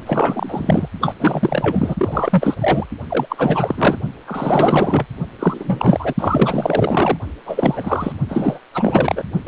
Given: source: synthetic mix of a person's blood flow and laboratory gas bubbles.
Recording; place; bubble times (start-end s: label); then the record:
Doppler ultrasound of blood flow; precordium
0.07-0.89 s: bubbles
1.01-1.15 s: bubbles
1.19-2.54 s: bubbles
2.60-2.86 s: bubbles
3.10-3.27 s: bubbles
3.29-3.97 s: bubbles
4.27-5.06 s: bubbles
5.39-6.14 s: bubbles
6.19-7.17 s: bubbles
7.46-8.13 s: bubbles
8.29-8.59 s: bubbles
8.74-9.24 s: bubbles
9.46-9.48 s: bubbles
From the record:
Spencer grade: 4 (maximum detectable bubble signal sounding continuously throughout systole and diastole of every cardiac period, and overriding the amplitude of the normal cardiac signals); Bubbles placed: only in the low amplitude regions of the cardiac cycle